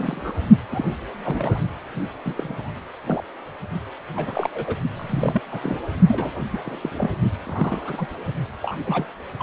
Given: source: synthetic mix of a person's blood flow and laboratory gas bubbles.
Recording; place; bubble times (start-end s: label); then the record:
Doppler ultrasound of blood flow; precordium
0.00-0.33 s: bubbles
0.70-0.84 s: bubbles
1.25-1.59 s: bubbles
2.25-2.72 s: bubbles
3.06-3.22 s: bubbles
4.15-4.50 s: bubbles
4.54-4.79 s: bubbles
4.96-5.42 s: bubbles
5.52-5.80 s: bubbles
6.07-6.31 s: bubbles
6.49-6.59 s: bubbles
6.65-6.76 s: bubbles
6.81-7.10 s: bubbles
7.46-8.07 s: bubbles
8.62-8.78 s: bubbles
8.85-9.05 s: bubbles
9.39-9.43 s: bubbles
From the record:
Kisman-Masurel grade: 242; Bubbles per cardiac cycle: several, 3 to 8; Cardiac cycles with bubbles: 100%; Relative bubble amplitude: moderate (0.250 to 0.450); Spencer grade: 3 (all of the cardiac periods contain showers or single bubble signals, but not dominating or overriding the cardiac motion signals); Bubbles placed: only in the low amplitude regions of the cardiac cycle